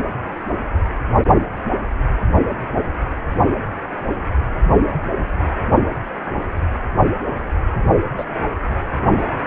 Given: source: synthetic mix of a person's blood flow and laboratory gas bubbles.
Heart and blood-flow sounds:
Doppler ultrasound of blood flow; precordium
8.18-8.24 s: bubbles
8.69-8.75 s: bubbles
From the record:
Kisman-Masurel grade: 113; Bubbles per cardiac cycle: 1 to 2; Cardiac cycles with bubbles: 1 to 10%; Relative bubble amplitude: loud (0.450 to 0.775); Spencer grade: 1 (occasional bubble signal discernible with the cardiac motion signal, with majority of cardiac periods free of bubbles); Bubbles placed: only in the low amplitude regions of the cardiac cycle

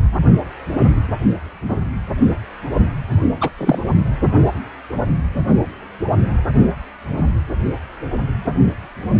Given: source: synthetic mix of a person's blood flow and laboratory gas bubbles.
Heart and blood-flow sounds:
Doppler ultrasound of blood flow; precordium
3.41-3.50 s: bubbles
3.58-3.77 s: bubbles
From the record:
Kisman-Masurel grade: 113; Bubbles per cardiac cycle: 1 to 2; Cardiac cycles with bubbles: 1 to 10%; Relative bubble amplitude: loud (0.450 to 0.775); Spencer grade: 1 (occasional bubble signal discernible with the cardiac motion signal, with majority of cardiac periods free of bubbles); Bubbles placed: only in the low amplitude regions of the cardiac cycle

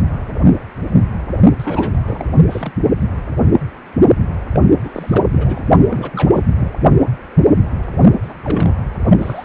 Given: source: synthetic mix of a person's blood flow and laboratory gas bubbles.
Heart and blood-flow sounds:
Doppler ultrasound of blood flow; precordium
1.58-2.33 s: bubbles
2.50-2.72 s: bubbles
4.53-4.60 s: bubbles
4.83-5.67 s: bubbles
5.89-6.71 s: bubbles
8.23-8.34 s: bubbles
8.43-8.74 s: bubbles
9.03-9.18 s: bubbles
9.21-9.45 s: bubbles
From the record:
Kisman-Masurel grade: 332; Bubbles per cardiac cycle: rolling drumbeat, 9 or more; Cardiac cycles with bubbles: 50 to 99%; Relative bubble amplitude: moderate (0.250 to 0.450); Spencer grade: 3 (all of the cardiac periods contain showers or single bubble signals, but not dominating or overriding the cardiac motion signals); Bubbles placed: only in the low amplitude regions of the cardiac cycle

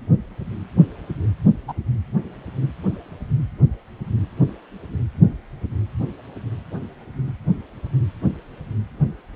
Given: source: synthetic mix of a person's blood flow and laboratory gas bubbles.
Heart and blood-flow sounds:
Doppler ultrasound of blood flow; precordium
1.68-1.73 s: bubbles
From the record:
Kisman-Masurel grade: 123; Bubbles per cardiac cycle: 1 to 2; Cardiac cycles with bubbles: 10 to 50%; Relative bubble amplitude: loud (0.450 to 0.775); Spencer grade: 2 (many but less than half of the cardiac periods contain bubble signals, singularly or in groups); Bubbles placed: anywhere in the cardiac cycle

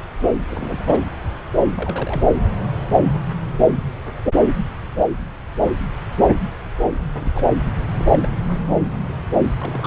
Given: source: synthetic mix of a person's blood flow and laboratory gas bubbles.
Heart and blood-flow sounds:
Doppler ultrasound of blood flow; subclavian vein
0.48-1.02 s: bubbles
1.75-2.23 s: bubbles
7.20-7.31 s: bubbles
7.34-7.45 s: bubbles
7.93-8.29 s: bubbles
8.46-8.58 s: bubbles
8.69-8.79 s: bubbles
9.58-9.87 s: bubbles
From the record:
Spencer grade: 2 (many but less than half of the cardiac periods contain bubble signals, singularly or in groups); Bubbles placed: anywhere in the cardiac cycle

